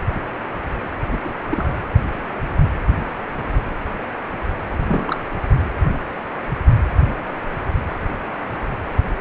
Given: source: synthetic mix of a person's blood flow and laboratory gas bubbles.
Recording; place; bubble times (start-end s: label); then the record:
Doppler ultrasound of blood flow; precordium
1.11-1.20 s: bubbles
1.24-1.29 s: bubbles
1.51-1.75 s: bubbles
4.87-5.23 s: bubbles
From the record:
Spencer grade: 2 (many but less than half of the cardiac periods contain bubble signals, singularly or in groups); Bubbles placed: anywhere in the cardiac cycle